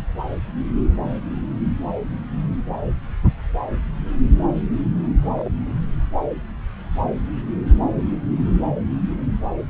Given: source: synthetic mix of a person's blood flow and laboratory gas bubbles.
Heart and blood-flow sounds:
Doppler ultrasound of blood flow; subclavian vein
5.21-5.51 s: bubbles
5.62-5.79 s: bubbles
From the record:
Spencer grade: 1 (occasional bubble signal discernible with the cardiac motion signal, with majority of cardiac periods free of bubbles); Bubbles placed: anywhere in the cardiac cycle

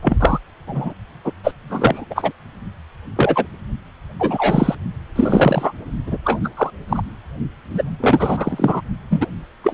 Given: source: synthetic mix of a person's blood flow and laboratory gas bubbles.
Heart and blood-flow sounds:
Doppler ultrasound of blood flow; precordium
0.02-0.39 s: bubbles
0.67-0.93 s: bubbles
1.25-1.32 s: bubbles
1.44-1.54 s: bubbles
1.69-2.05 s: bubbles
2.10-2.32 s: bubbles
3.16-3.46 s: bubbles
4.20-4.75 s: bubbles
5.16-5.72 s: bubbles
6.07-6.17 s: bubbles
6.25-6.39 s: bubbles
6.44-6.50 s: bubbles
6.57-6.70 s: bubbles
6.89-7.02 s: bubbles
7.74-7.82 s: bubbles
8.00-8.81 s: bubbles
9.10-9.27 s: bubbles
9.63-9.74 s: bubbles
From the record:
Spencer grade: 3 (all of the cardiac periods contain showers or single bubble signals, but not dominating or overriding the cardiac motion signals); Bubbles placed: only in the low amplitude regions of the cardiac cycle

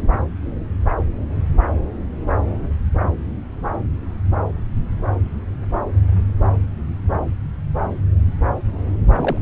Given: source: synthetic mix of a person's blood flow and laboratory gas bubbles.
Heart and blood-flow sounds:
Doppler ultrasound of blood flow; subclavian vein
9.17-9.38 s: bubbles
From the record:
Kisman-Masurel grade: 112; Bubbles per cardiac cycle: 1 to 2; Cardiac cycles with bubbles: 1 to 10%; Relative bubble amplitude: moderate (0.250 to 0.450); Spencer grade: 1 (occasional bubble signal discernible with the cardiac motion signal, with majority of cardiac periods free of bubbles); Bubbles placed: anywhere in the cardiac cycle

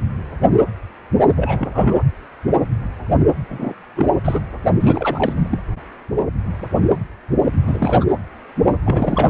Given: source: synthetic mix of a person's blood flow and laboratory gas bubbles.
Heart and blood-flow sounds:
Doppler ultrasound of blood flow; precordium
1.36-2.03 s: bubbles
3.48-3.74 s: bubbles
3.96-4.07 s: bubbles
4.25-4.41 s: bubbles
4.80-5.63 s: bubbles
7.67-8.04 s: bubbles
8.86-9.30 s: bubbles
From the record:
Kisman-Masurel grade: 222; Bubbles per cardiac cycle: several, 3 to 8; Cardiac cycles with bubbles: 10 to 50%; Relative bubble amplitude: moderate (0.250 to 0.450); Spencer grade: 2 (many but less than half of the cardiac periods contain bubble signals, singularly or in groups); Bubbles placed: anywhere in the cardiac cycle

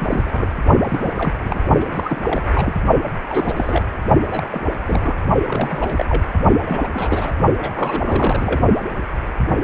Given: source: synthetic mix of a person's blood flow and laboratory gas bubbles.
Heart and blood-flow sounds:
Doppler ultrasound of blood flow; precordium
0.00-0.51 s: bubbles
0.84-1.12 s: bubbles
1.15-1.39 s: bubbles
1.44-1.58 s: bubbles
1.80-1.85 s: bubbles
1.91-2.21 s: bubbles
2.27-2.49 s: bubbles
2.53-2.75 s: bubbles
3.29-3.52 s: bubbles
3.56-3.84 s: bubbles
4.29-4.47 s: bubbles
4.51-4.65 s: bubbles
4.85-5.16 s: bubbles
5.47-6.05 s: bubbles
6.08-6.22 s: bubbles
6.62-7.32 s: bubbles
7.57-7.71 s: bubbles
7.75-8.61 s: bubbles
From the record:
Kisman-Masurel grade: 332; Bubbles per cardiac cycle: rolling drumbeat, 9 or more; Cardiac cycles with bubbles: 50 to 99%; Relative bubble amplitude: moderate (0.250 to 0.450); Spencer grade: 3 (all of the cardiac periods contain showers or single bubble signals, but not dominating or overriding the cardiac motion signals); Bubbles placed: only in the low amplitude regions of the cardiac cycle

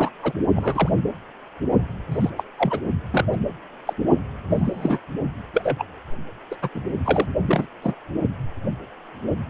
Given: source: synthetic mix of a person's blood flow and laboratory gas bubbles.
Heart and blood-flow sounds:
Doppler ultrasound of blood flow; precordium
0.00-0.10 s: bubbles
0.23-0.32 s: bubbles
0.56-0.90 s: bubbles
2.10-2.30 s: bubbles
2.38-2.43 s: bubbles
2.58-2.81 s: bubbles
3.10-3.25 s: bubbles
3.32-3.37 s: bubbles
3.85-3.94 s: bubbles
4.50-4.99 s: bubbles
5.54-5.85 s: bubbles
6.51-6.56 s: bubbles
6.62-6.69 s: bubbles
6.75-6.81 s: bubbles
7.04-7.26 s: bubbles
7.49-7.67 s: bubbles
7.82-7.95 s: bubbles
From the record:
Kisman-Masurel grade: 232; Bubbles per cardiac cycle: several, 3 to 8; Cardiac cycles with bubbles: 50 to 99%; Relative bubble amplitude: moderate (0.250 to 0.450); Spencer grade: 3 (all of the cardiac periods contain showers or single bubble signals, but not dominating or overriding the cardiac motion signals); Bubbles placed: only in the low amplitude regions of the cardiac cycle

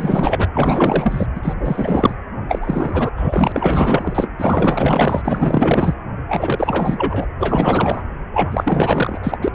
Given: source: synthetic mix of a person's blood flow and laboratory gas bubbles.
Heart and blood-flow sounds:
Doppler ultrasound of blood flow; precordium
0.00-0.48 s: bubbles
0.53-1.27 s: bubbles
1.35-1.54 s: bubbles
1.56-2.15 s: bubbles
2.48-3.11 s: bubbles
3.16-4.29 s: bubbles
4.38-5.21 s: bubbles
5.25-5.95 s: bubbles
6.28-7.25 s: bubbles
7.40-8.03 s: bubbles
8.33-9.38 s: bubbles
9.41-9.48 s: bubbles
From the record:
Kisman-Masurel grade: 444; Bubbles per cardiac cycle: continuous sound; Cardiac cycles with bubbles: 100%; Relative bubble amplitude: maximal (0.775 to 0.999); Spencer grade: 4 (maximum detectable bubble signal sounding continuously throughout systole and diastole of every cardiac period, and overriding the amplitude of the normal cardiac signals); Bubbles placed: anywhere in the cardiac cycle

